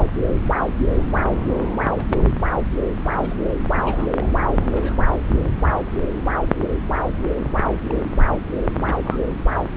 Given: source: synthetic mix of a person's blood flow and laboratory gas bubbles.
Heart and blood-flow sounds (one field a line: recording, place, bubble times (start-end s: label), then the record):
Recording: Doppler ultrasound of blood flow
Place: subclavian vein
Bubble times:
1.97-2.24 s: bubbles
3.00-3.43 s: bubbles
3.73-4.10 s: bubbles
4.15-4.32 s: bubbles
4.71-5.03 s: bubbles
5.14-5.24 s: bubbles
5.41-5.49 s: bubbles
7.57-7.78 s: bubbles
7.90-8.04 s: bubbles
8.78-8.96 s: bubbles
9.03-9.18 s: bubbles
From the record:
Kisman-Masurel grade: 221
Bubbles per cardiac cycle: several, 3 to 8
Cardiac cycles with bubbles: 10 to 50%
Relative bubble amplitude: barely perceptible (0.100 to 0.250)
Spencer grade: 2 (many but less than half of the cardiac periods contain bubble signals, singularly or in groups)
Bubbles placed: anywhere in the cardiac cycle